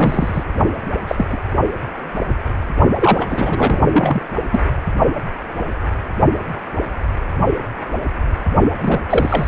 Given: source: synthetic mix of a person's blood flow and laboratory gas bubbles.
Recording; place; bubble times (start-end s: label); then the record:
Doppler ultrasound of blood flow; precordium
0.00-0.43 s: bubbles
1.07-1.27 s: bubbles
1.30-1.38 s: bubbles
2.99-3.80 s: bubbles
3.91-4.23 s: bubbles
4.51-4.63 s: bubbles
8.81-9.00 s: bubbles
9.09-9.48 s: bubbles
From the record:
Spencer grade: 3 (all of the cardiac periods contain showers or single bubble signals, but not dominating or overriding the cardiac motion signals); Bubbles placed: only in the low amplitude regions of the cardiac cycle